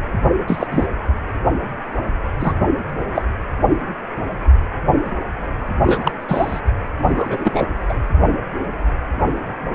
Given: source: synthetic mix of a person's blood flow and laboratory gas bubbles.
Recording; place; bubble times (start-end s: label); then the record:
Doppler ultrasound of blood flow; precordium
0.47-0.67 s: bubbles
0.71-0.87 s: bubbles
2.40-2.54 s: bubbles
3.15-3.23 s: bubbles
5.83-6.12 s: bubbles
6.28-6.60 s: bubbles
7.02-7.67 s: bubbles
7.88-7.94 s: bubbles
From the record:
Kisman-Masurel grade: 223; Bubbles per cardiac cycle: several, 3 to 8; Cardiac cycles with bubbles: 10 to 50%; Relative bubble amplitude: loud (0.450 to 0.775); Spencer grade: 2 (many but less than half of the cardiac periods contain bubble signals, singularly or in groups); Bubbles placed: anywhere in the cardiac cycle